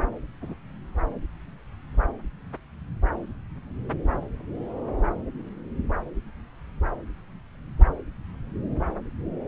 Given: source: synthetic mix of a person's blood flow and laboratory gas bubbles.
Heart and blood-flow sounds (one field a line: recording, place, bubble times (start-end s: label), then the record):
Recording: Doppler ultrasound of blood flow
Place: subclavian vein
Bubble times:
0.41-0.54 s: bubbles
From the record:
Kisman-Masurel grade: 111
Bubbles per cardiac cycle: 1 to 2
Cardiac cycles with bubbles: 1 to 10%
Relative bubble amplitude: barely perceptible (0.100 to 0.250)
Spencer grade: 1 (occasional bubble signal discernible with the cardiac motion signal, with majority of cardiac periods free of bubbles)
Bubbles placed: anywhere in the cardiac cycle